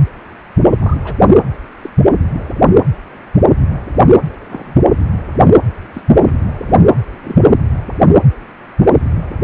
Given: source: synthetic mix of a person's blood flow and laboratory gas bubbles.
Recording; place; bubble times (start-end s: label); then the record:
Doppler ultrasound of blood flow; precordium
0.77-0.97 s: bubbles
1.04-1.15 s: bubbles
1.83-1.90 s: bubbles
4.49-4.75 s: bubbles
5.94-6.04 s: bubbles
6.22-6.32 s: bubbles
7.23-7.38 s: bubbles
7.44-7.49 s: bubbles
From the record:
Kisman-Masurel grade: 122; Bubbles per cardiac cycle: 1 to 2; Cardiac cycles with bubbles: 10 to 50%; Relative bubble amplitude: moderate (0.250 to 0.450); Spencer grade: 2 (many but less than half of the cardiac periods contain bubble signals, singularly or in groups); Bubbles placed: anywhere in the cardiac cycle